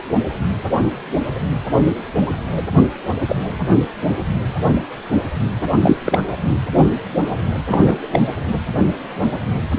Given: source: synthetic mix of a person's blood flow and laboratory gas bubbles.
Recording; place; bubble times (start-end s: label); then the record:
Doppler ultrasound of blood flow; precordium
2.56-2.62 s: bubbles
3.29-3.36 s: bubbles
5.82-5.96 s: bubbles
6.05-6.20 s: bubbles
7.68-7.97 s: bubbles
8.13-8.19 s: bubbles
From the record:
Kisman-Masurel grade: 123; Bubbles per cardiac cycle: 1 to 2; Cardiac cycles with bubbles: 10 to 50%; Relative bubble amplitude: loud (0.450 to 0.775); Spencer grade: 2 (many but less than half of the cardiac periods contain bubble signals, singularly or in groups); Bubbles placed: anywhere in the cardiac cycle